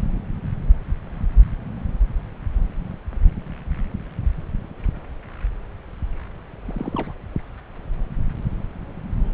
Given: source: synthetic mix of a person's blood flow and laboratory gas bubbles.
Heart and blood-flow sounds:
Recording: Doppler ultrasound of blood flow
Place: subclavian vein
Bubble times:
6.65-7.13 s: bubbles
From the record:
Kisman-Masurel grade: 211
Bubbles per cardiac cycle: several, 3 to 8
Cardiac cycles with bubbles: 1 to 10%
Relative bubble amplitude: barely perceptible (0.100 to 0.250)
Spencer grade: 1 (occasional bubble signal discernible with the cardiac motion signal, with majority of cardiac periods free of bubbles)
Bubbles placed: anywhere in the cardiac cycle

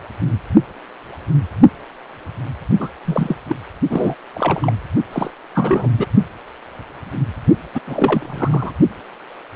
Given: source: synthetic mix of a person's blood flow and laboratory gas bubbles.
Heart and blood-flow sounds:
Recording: Doppler ultrasound of blood flow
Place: precordium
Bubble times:
2.79-2.88 s: bubbles
3.04-3.35 s: bubbles
3.49-3.56 s: bubbles
3.89-4.16 s: bubbles
4.34-4.72 s: bubbles
5.12-5.30 s: bubbles
5.54-5.88 s: bubbles
5.97-6.06 s: bubbles
7.75-7.80 s: bubbles
7.86-8.74 s: bubbles
From the record:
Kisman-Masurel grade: 222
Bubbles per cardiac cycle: several, 3 to 8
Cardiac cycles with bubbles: 10 to 50%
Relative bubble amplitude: moderate (0.250 to 0.450)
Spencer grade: 2 (many but less than half of the cardiac periods contain bubble signals, singularly or in groups)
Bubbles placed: only in the low amplitude regions of the cardiac cycle

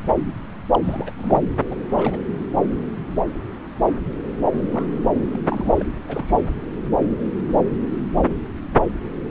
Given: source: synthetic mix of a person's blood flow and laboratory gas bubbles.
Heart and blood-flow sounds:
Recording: Doppler ultrasound of blood flow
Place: subclavian vein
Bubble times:
0.71-1.11 s: bubbles
1.17-1.45 s: bubbles
1.70-1.76 s: bubbles
1.84-2.21 s: bubbles
4.71-4.88 s: bubbles
5.31-5.40 s: bubbles
5.45-5.73 s: bubbles
5.75-5.84 s: bubbles
6.08-6.46 s: bubbles
From the record:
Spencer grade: 2 (many but less than half of the cardiac periods contain bubble signals, singularly or in groups)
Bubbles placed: anywhere in the cardiac cycle

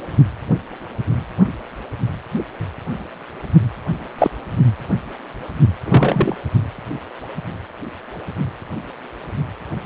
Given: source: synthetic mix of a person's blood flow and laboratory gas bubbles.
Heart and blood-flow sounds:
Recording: Doppler ultrasound of blood flow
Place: precordium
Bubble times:
4.18-4.31 s: bubbles
5.85-6.36 s: bubbles
From the record:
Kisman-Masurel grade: 123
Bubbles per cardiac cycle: 1 to 2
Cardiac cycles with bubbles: 10 to 50%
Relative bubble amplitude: loud (0.450 to 0.775)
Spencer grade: 2 (many but less than half of the cardiac periods contain bubble signals, singularly or in groups)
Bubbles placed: only in the low amplitude regions of the cardiac cycle

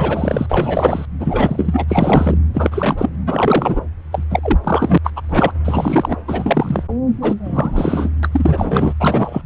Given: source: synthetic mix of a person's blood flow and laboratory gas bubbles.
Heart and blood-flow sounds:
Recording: Doppler ultrasound of blood flow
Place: subclavian vein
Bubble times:
0.00-0.47 s: bubbles
0.50-1.06 s: bubbles
1.19-1.84 s: bubbles
1.88-2.38 s: bubbles
2.54-3.17 s: bubbles
3.26-3.80 s: bubbles
4.12-4.23 s: bubbles
4.30-4.39 s: bubbles
4.42-4.59 s: bubbles
4.63-4.98 s: bubbles
5.04-5.11 s: bubbles
5.16-5.21 s: bubbles
5.29-5.51 s: bubbles
5.64-6.16 s: bubbles
6.27-6.83 s: bubbles
7.21-7.34 s: bubbles
7.43-8.10 s: bubbles
8.23-8.29 s: bubbles
8.31-8.94 s: bubbles
9.00-9.41 s: bubbles
From the record:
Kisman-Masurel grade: 343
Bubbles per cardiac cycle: rolling drumbeat, 9 or more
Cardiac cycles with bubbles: 100%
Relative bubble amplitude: loud (0.450 to 0.775)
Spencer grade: 3 (all of the cardiac periods contain showers or single bubble signals, but not dominating or overriding the cardiac motion signals)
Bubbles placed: anywhere in the cardiac cycle

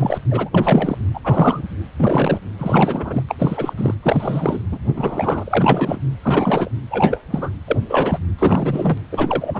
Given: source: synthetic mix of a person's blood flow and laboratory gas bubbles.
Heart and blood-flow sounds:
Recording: Doppler ultrasound of blood flow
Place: precordium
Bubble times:
0.00-0.18 s: bubbles
0.31-0.49 s: bubbles
0.54-0.97 s: bubbles
1.14-1.20 s: bubbles
1.24-1.62 s: bubbles
1.96-2.40 s: bubbles
2.59-3.23 s: bubbles
3.29-3.34 s: bubbles
3.39-3.73 s: bubbles
3.75-3.95 s: bubbles
4.03-4.62 s: bubbles
4.71-4.79 s: bubbles
4.85-5.98 s: bubbles
6.22-6.72 s: bubbles
6.91-7.21 s: bubbles
7.30-7.51 s: bubbles
7.67-7.80 s: bubbles
7.89-8.19 s: bubbles
8.39-8.98 s: bubbles
9.11-9.60 s: bubbles
From the record:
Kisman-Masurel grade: 342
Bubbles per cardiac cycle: rolling drumbeat, 9 or more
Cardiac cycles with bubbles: 100%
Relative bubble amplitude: moderate (0.250 to 0.450)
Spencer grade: 3 (all of the cardiac periods contain showers or single bubble signals, but not dominating or overriding the cardiac motion signals)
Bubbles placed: anywhere in the cardiac cycle

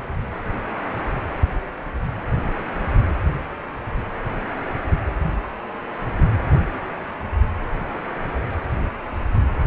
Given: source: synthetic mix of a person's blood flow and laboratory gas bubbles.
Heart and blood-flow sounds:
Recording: Doppler ultrasound of blood flow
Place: precordium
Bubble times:
no bubbles
From the record:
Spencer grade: 0 (complete lack of bubble signals)

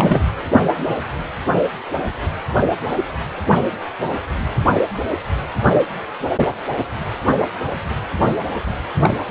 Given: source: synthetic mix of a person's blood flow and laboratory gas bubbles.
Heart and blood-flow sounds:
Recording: Doppler ultrasound of blood flow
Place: precordium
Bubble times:
0.00-0.23 s: bubbles
9.03-9.14 s: bubbles
9.26-9.31 s: bubbles
From the record:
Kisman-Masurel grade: 222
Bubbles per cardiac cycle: several, 3 to 8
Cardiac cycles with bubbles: 10 to 50%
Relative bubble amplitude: moderate (0.250 to 0.450)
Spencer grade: 2 (many but less than half of the cardiac periods contain bubble signals, singularly or in groups)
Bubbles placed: anywhere in the cardiac cycle

